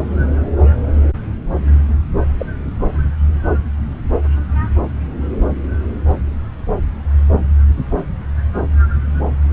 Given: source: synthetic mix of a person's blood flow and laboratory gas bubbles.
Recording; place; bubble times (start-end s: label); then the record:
Doppler ultrasound of blood flow; subclavian vein
2.37-2.46 s: bubbles
From the record:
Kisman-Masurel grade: 111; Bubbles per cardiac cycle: 1 to 2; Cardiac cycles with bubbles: 1 to 10%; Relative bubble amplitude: barely perceptible (0.100 to 0.250); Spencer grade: 1 (occasional bubble signal discernible with the cardiac motion signal, with majority of cardiac periods free of bubbles); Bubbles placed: anywhere in the cardiac cycle